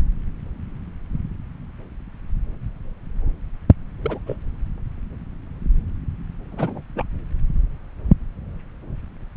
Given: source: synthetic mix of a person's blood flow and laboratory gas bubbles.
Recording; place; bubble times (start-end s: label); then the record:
Doppler ultrasound of blood flow; subclavian vein
4.03-4.19 s: bubbles
4.27-4.37 s: bubbles
6.52-6.82 s: bubbles
6.95-7.04 s: bubbles
From the record:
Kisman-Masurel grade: 221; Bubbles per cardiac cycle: several, 3 to 8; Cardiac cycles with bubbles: 10 to 50%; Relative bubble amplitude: barely perceptible (0.100 to 0.250); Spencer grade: 2 (many but less than half of the cardiac periods contain bubble signals, singularly or in groups); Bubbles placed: anywhere in the cardiac cycle